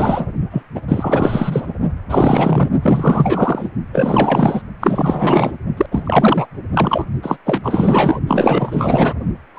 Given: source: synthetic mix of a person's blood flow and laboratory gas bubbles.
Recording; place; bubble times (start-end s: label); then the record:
Doppler ultrasound of blood flow; precordium
0.00-0.27 s: bubbles
0.51-0.62 s: bubbles
0.75-0.80 s: bubbles
0.88-1.73 s: bubbles
2.09-2.69 s: bubbles
2.81-3.69 s: bubbles
3.92-4.62 s: bubbles
4.80-5.56 s: bubbles
5.77-5.86 s: bubbles
5.91-6.48 s: bubbles
6.74-7.06 s: bubbles
7.22-7.37 s: bubbles
7.46-8.21 s: bubbles
8.27-9.13 s: bubbles
9.54-9.59 s: bubbles
From the record:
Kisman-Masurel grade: 444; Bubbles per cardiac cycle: continuous sound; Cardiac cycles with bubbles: 100%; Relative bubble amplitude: maximal (0.775 to 0.999); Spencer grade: 4 (maximum detectable bubble signal sounding continuously throughout systole and diastole of every cardiac period, and overriding the amplitude of the normal cardiac signals); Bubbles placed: only in the low amplitude regions of the cardiac cycle